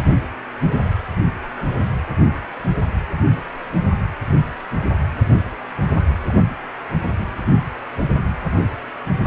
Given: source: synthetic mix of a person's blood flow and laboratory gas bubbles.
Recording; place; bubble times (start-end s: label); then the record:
Doppler ultrasound of blood flow; precordium
6.26-6.31 s: bubbles
From the record:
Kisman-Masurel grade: 111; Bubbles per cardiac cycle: 1 to 2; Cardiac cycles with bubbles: 1 to 10%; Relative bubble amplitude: barely perceptible (0.100 to 0.250); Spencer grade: 1 (occasional bubble signal discernible with the cardiac motion signal, with majority of cardiac periods free of bubbles); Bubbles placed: anywhere in the cardiac cycle